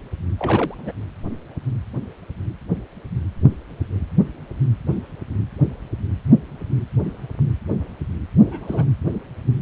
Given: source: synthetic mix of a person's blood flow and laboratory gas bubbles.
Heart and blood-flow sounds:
Doppler ultrasound of blood flow; precordium
0.39-0.74 s: bubbles
0.77-0.92 s: bubbles
8.40-8.85 s: bubbles
From the record:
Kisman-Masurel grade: 211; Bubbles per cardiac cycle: several, 3 to 8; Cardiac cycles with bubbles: 1 to 10%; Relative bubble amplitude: barely perceptible (0.100 to 0.250); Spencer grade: 1 (occasional bubble signal discernible with the cardiac motion signal, with majority of cardiac periods free of bubbles); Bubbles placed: anywhere in the cardiac cycle

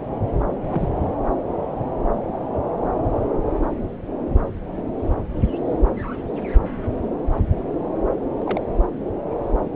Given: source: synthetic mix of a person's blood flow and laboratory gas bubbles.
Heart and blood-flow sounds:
Doppler ultrasound of blood flow; subclavian vein
0.70-0.88 s: bubbles
8.39-8.59 s: bubbles
From the record:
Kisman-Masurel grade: 122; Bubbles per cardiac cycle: 1 to 2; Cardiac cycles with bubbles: 10 to 50%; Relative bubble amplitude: moderate (0.250 to 0.450); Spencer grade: 2 (many but less than half of the cardiac periods contain bubble signals, singularly or in groups); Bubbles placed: anywhere in the cardiac cycle

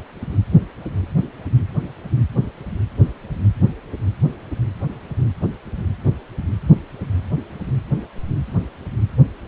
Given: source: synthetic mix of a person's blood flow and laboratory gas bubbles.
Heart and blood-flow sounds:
Doppler ultrasound of blood flow; precordium
no bubbles
From the record:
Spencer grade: 0 (complete lack of bubble signals)

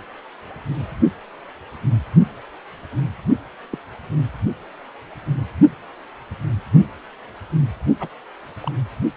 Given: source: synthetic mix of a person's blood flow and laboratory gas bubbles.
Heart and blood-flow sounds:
Doppler ultrasound of blood flow; precordium
3.71-3.78 s: bubbles
8.00-8.08 s: bubbles
8.61-8.71 s: bubbles
From the record:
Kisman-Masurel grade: 121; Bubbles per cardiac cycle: 1 to 2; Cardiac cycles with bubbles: 10 to 50%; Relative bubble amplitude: barely perceptible (0.100 to 0.250); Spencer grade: 2 (many but less than half of the cardiac periods contain bubble signals, singularly or in groups); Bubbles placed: only in the low amplitude regions of the cardiac cycle

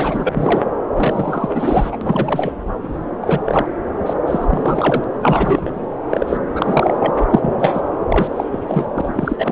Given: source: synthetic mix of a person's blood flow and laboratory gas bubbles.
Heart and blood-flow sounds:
Doppler ultrasound of blood flow; subclavian vein
0.00-0.61 s: bubbles
0.96-1.97 s: bubbles
2.01-2.53 s: bubbles
2.83-2.89 s: bubbles
3.21-3.43 s: bubbles
3.45-3.66 s: bubbles
4.05-4.13 s: bubbles
4.26-5.04 s: bubbles
5.21-5.71 s: bubbles
6.09-6.39 s: bubbles
6.55-7.14 s: bubbles
7.19-7.25 s: bubbles
7.30-7.57 s: bubbles
7.59-7.82 s: bubbles
8.09-8.28 s: bubbles
8.36-8.44 s: bubbles
8.52-8.59 s: bubbles
8.67-8.88 s: bubbles
8.95-9.13 s: bubbles
9.16-9.52 s: bubbles
From the record:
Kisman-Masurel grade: 343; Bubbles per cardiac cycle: rolling drumbeat, 9 or more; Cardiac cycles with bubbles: 100%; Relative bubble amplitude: loud (0.450 to 0.775); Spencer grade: 3 (all of the cardiac periods contain showers or single bubble signals, but not dominating or overriding the cardiac motion signals); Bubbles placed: anywhere in the cardiac cycle

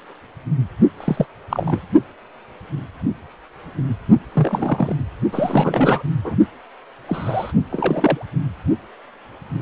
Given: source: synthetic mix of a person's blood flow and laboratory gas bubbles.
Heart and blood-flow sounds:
Doppler ultrasound of blood flow; precordium
1.00-1.26 s: bubbles
1.49-1.81 s: bubbles
4.33-4.97 s: bubbles
5.32-6.04 s: bubbles
6.24-6.36 s: bubbles
7.08-7.52 s: bubbles
7.71-8.26 s: bubbles
From the record:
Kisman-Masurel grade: 232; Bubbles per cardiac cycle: several, 3 to 8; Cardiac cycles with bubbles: 50 to 99%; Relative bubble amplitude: moderate (0.250 to 0.450); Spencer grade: 3 (all of the cardiac periods contain showers or single bubble signals, but not dominating or overriding the cardiac motion signals); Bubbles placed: only in the low amplitude regions of the cardiac cycle

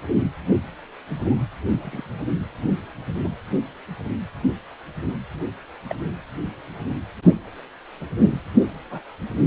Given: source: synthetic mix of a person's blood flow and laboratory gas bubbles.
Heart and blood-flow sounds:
Doppler ultrasound of blood flow; precordium
0.50-0.59 s: bubbles
1.24-1.39 s: bubbles
1.77-2.12 s: bubbles
2.62-2.71 s: bubbles
3.23-3.30 s: bubbles
5.89-5.94 s: bubbles
8.90-9.02 s: bubbles
From the record:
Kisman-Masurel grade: 121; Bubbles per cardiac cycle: 1 to 2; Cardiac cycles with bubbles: 10 to 50%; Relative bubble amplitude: barely perceptible (0.100 to 0.250); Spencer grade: 2 (many but less than half of the cardiac periods contain bubble signals, singularly or in groups); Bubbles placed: anywhere in the cardiac cycle

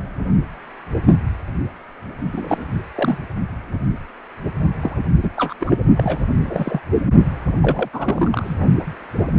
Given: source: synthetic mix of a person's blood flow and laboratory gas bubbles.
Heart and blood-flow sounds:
Doppler ultrasound of blood flow; precordium
2.31-2.65 s: bubbles
2.95-3.18 s: bubbles
4.81-4.96 s: bubbles
5.22-5.30 s: bubbles
5.36-5.54 s: bubbles
5.60-5.75 s: bubbles
5.97-6.19 s: bubbles
6.46-6.80 s: bubbles
7.55-7.89 s: bubbles
7.92-8.55 s: bubbles
From the record:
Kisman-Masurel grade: 232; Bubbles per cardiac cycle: several, 3 to 8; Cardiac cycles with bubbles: 50 to 99%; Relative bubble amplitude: moderate (0.250 to 0.450); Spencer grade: 3 (all of the cardiac periods contain showers or single bubble signals, but not dominating or overriding the cardiac motion signals); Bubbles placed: only in the low amplitude regions of the cardiac cycle

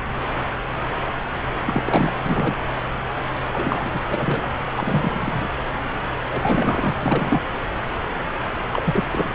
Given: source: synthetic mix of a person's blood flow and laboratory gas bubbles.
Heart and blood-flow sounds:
Doppler ultrasound of blood flow; subclavian vein
1.65-2.21 s: bubbles
2.26-2.56 s: bubbles
3.53-4.01 s: bubbles
4.09-4.47 s: bubbles
4.75-5.54 s: bubbles
6.31-6.98 s: bubbles
7.01-7.42 s: bubbles
8.73-9.05 s: bubbles
9.11-9.29 s: bubbles
From the record:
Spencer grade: 3 (all of the cardiac periods contain showers or single bubble signals, but not dominating or overriding the cardiac motion signals); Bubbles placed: anywhere in the cardiac cycle

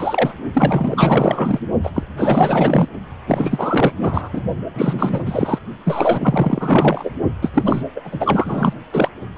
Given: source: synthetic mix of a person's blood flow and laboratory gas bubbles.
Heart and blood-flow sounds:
Doppler ultrasound of blood flow; precordium
0.00-0.33 s: bubbles
0.53-1.59 s: bubbles
1.83-1.90 s: bubbles
1.94-2.03 s: bubbles
2.17-2.88 s: bubbles
3.27-3.92 s: bubbles
4.01-4.29 s: bubbles
4.33-4.41 s: bubbles
4.74-5.23 s: bubbles
5.26-5.58 s: bubbles
5.85-7.10 s: bubbles
7.42-7.83 s: bubbles
7.96-8.01 s: bubbles
8.04-8.74 s: bubbles
8.91-9.09 s: bubbles
9.36-9.38 s: bubbles
From the record:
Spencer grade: 4 (maximum detectable bubble signal sounding continuously throughout systole and diastole of every cardiac period, and overriding the amplitude of the normal cardiac signals); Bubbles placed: only in the low amplitude regions of the cardiac cycle

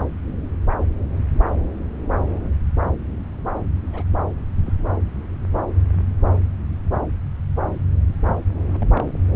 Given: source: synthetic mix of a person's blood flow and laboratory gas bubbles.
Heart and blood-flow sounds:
Doppler ultrasound of blood flow; subclavian vein
3.93-4.03 s: bubbles
4.66-4.73 s: bubbles
8.27-8.43 s: bubbles
8.68-8.89 s: bubbles
8.96-9.11 s: bubbles
From the record:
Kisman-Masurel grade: 121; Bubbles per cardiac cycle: 1 to 2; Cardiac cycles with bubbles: 10 to 50%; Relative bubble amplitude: barely perceptible (0.100 to 0.250); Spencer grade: 2 (many but less than half of the cardiac periods contain bubble signals, singularly or in groups); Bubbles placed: anywhere in the cardiac cycle

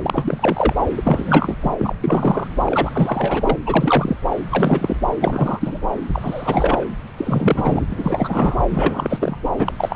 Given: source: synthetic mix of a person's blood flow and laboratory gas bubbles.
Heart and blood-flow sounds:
Doppler ultrasound of blood flow; subclavian vein
0.00-0.74 s: bubbles
0.96-1.57 s: bubbles
1.61-1.73 s: bubbles
1.78-1.95 s: bubbles
2.00-2.48 s: bubbles
2.65-3.58 s: bubbles
3.66-4.17 s: bubbles
4.50-4.97 s: bubbles
5.21-5.81 s: bubbles
6.12-6.88 s: bubbles
7.17-7.85 s: bubbles
7.90-8.56 s: bubbles
8.71-9.36 s: bubbles
9.59-9.74 s: bubbles
9.78-9.96 s: bubbles
From the record:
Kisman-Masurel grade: 343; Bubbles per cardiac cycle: rolling drumbeat, 9 or more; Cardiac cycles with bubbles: 100%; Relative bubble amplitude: loud (0.450 to 0.775); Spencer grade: 3 (all of the cardiac periods contain showers or single bubble signals, but not dominating or overriding the cardiac motion signals); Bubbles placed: anywhere in the cardiac cycle

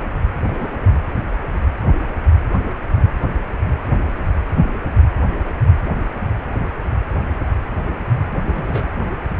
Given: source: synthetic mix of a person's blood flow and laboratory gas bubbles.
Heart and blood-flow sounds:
Doppler ultrasound of blood flow; precordium
0.47-0.93 s: bubbles
8.31-8.89 s: bubbles
From the record:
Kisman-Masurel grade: 221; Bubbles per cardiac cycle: several, 3 to 8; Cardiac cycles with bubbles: 10 to 50%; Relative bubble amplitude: barely perceptible (0.100 to 0.250); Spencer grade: 2 (many but less than half of the cardiac periods contain bubble signals, singularly or in groups); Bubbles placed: anywhere in the cardiac cycle

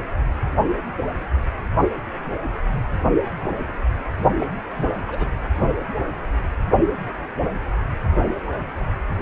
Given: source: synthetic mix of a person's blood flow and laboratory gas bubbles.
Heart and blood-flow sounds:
Doppler ultrasound of blood flow; precordium
4.38-4.46 s: bubbles
4.77-4.95 s: bubbles
5.08-5.30 s: bubbles
From the record:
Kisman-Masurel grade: 221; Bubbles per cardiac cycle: several, 3 to 8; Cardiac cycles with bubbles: 10 to 50%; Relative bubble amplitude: barely perceptible (0.100 to 0.250); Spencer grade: 2 (many but less than half of the cardiac periods contain bubble signals, singularly or in groups); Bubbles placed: only in the low amplitude regions of the cardiac cycle

